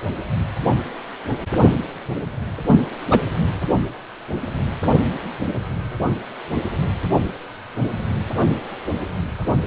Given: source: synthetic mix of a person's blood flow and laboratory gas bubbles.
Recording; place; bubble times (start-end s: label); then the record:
Doppler ultrasound of blood flow; precordium
2.66-2.79 s: bubbles
3.11-3.21 s: bubbles
From the record:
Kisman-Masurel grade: 113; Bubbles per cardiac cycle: 1 to 2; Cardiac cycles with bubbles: 1 to 10%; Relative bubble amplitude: loud (0.450 to 0.775); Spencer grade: 1 (occasional bubble signal discernible with the cardiac motion signal, with majority of cardiac periods free of bubbles); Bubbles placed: anywhere in the cardiac cycle